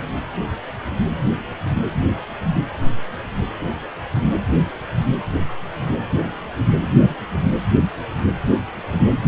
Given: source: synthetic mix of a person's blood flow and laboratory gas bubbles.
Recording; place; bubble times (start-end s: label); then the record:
Doppler ultrasound of blood flow; precordium
no bubbles
From the record:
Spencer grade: 0 (complete lack of bubble signals)